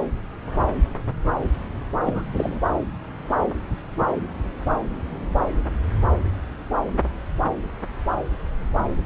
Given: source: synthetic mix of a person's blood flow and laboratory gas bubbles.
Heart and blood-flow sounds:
Doppler ultrasound of blood flow; subclavian vein
2.06-2.23 s: bubbles
2.33-2.60 s: bubbles
From the record:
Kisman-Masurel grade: 212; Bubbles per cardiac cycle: several, 3 to 8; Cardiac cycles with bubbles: 1 to 10%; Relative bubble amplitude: moderate (0.250 to 0.450); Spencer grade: 1 (occasional bubble signal discernible with the cardiac motion signal, with majority of cardiac periods free of bubbles); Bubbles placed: anywhere in the cardiac cycle

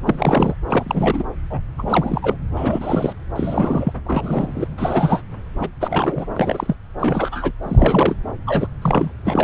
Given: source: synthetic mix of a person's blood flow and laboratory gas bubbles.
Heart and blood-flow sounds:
Doppler ultrasound of blood flow; subclavian vein
0.05-0.54 s: bubbles
0.67-1.23 s: bubbles
1.50-1.60 s: bubbles
1.78-2.36 s: bubbles
2.57-3.13 s: bubbles
3.35-3.93 s: bubbles
4.04-4.67 s: bubbles
4.78-5.22 s: bubbles
5.59-5.70 s: bubbles
5.80-6.26 s: bubbles
6.36-6.75 s: bubbles
7.00-7.51 s: bubbles
7.62-8.15 s: bubbles
8.46-8.67 s: bubbles
8.81-9.12 s: bubbles
9.26-9.44 s: bubbles
From the record:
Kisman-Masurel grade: 342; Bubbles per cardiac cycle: rolling drumbeat, 9 or more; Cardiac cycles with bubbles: 100%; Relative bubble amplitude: moderate (0.250 to 0.450); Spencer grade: 3 (all of the cardiac periods contain showers or single bubble signals, but not dominating or overriding the cardiac motion signals); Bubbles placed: anywhere in the cardiac cycle

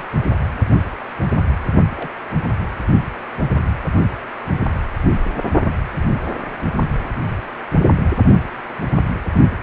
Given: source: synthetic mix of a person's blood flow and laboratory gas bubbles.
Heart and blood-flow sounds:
Doppler ultrasound of blood flow; precordium
0.00-0.10 s: bubbles
1.96-2.10 s: bubbles
2.63-2.67 s: bubbles
From the record:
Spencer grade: 2 (many but less than half of the cardiac periods contain bubble signals, singularly or in groups); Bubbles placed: only in the low amplitude regions of the cardiac cycle

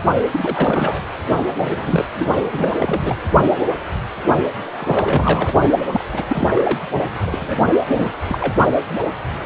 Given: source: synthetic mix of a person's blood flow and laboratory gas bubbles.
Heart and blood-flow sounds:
Doppler ultrasound of blood flow; precordium
0.33-0.99 s: bubbles
1.58-1.69 s: bubbles
1.76-2.06 s: bubbles
2.15-2.25 s: bubbles
2.52-2.72 s: bubbles
2.78-3.16 s: bubbles
4.77-5.54 s: bubbles
5.92-6.04 s: bubbles
6.12-6.25 s: bubbles
6.28-6.78 s: bubbles
7.26-7.62 s: bubbles
7.79-7.85 s: bubbles
7.89-8.07 s: bubbles
8.27-8.54 s: bubbles
From the record:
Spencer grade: 3 (all of the cardiac periods contain showers or single bubble signals, but not dominating or overriding the cardiac motion signals); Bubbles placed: only in the low amplitude regions of the cardiac cycle

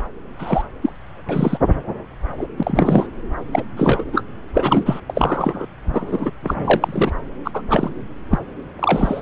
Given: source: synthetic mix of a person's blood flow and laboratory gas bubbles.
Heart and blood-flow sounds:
Doppler ultrasound of blood flow; subclavian vein
0.38-0.62 s: bubbles
0.82-0.92 s: bubbles
1.29-1.58 s: bubbles
2.38-2.46 s: bubbles
2.57-3.08 s: bubbles
3.52-3.63 s: bubbles
3.77-4.04 s: bubbles
4.12-4.22 s: bubbles
4.54-5.00 s: bubbles
5.09-5.66 s: bubbles
5.84-6.31 s: bubbles
6.42-7.11 s: bubbles
7.44-7.51 s: bubbles
7.53-7.62 s: bubbles
7.69-7.90 s: bubbles
8.30-8.38 s: bubbles
8.79-9.22 s: bubbles
From the record:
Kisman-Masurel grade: 243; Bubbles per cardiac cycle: several, 3 to 8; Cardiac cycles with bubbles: 100%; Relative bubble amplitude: loud (0.450 to 0.775); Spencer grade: 3 (all of the cardiac periods contain showers or single bubble signals, but not dominating or overriding the cardiac motion signals); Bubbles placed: anywhere in the cardiac cycle

